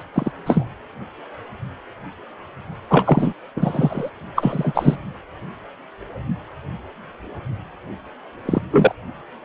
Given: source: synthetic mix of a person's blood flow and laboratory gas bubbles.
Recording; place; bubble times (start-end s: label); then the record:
Doppler ultrasound of blood flow; precordium
0.00-0.02 s: bubbles
0.14-0.31 s: bubbles
0.46-0.67 s: bubbles
2.90-3.33 s: bubbles
3.57-4.10 s: bubbles
4.35-4.96 s: bubbles
8.45-8.62 s: bubbles
8.71-8.95 s: bubbles
From the record:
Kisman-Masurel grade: 233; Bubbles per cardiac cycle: several, 3 to 8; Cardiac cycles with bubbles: 50 to 99%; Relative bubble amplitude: loud (0.450 to 0.775); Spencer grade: 3 (all of the cardiac periods contain showers or single bubble signals, but not dominating or overriding the cardiac motion signals); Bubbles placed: anywhere in the cardiac cycle